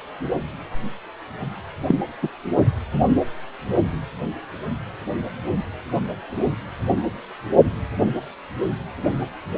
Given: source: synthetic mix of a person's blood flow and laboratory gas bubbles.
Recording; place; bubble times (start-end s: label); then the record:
Doppler ultrasound of blood flow; precordium
1.88-1.95 s: bubbles
2.22-2.28 s: bubbles
From the record:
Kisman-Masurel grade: 113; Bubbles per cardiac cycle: 1 to 2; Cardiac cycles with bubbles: 1 to 10%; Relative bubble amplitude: loud (0.450 to 0.775); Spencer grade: 1 (occasional bubble signal discernible with the cardiac motion signal, with majority of cardiac periods free of bubbles); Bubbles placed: anywhere in the cardiac cycle